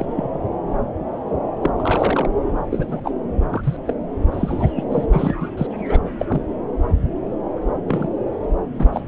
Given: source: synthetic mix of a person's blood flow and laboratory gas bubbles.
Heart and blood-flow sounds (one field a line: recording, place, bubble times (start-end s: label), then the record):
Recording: Doppler ultrasound of blood flow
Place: subclavian vein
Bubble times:
0.00-0.39 s: bubbles
1.61-1.70 s: bubbles
1.78-2.30 s: bubbles
2.70-3.00 s: bubbles
3.04-3.12 s: bubbles
3.50-3.77 s: bubbles
3.87-3.94 s: bubbles
4.32-4.73 s: bubbles
4.75-4.83 s: bubbles
4.90-5.07 s: bubbles
5.12-5.34 s: bubbles
5.40-5.49 s: bubbles
5.57-5.67 s: bubbles
5.89-6.00 s: bubbles
6.19-6.25 s: bubbles
6.29-6.42 s: bubbles
7.88-8.08 s: bubbles
8.73-8.87 s: bubbles
8.92-9.08 s: bubbles
From the record:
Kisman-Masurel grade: 232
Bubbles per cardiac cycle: several, 3 to 8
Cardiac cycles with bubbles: 50 to 99%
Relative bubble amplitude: moderate (0.250 to 0.450)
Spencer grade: 3 (all of the cardiac periods contain showers or single bubble signals, but not dominating or overriding the cardiac motion signals)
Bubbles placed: anywhere in the cardiac cycle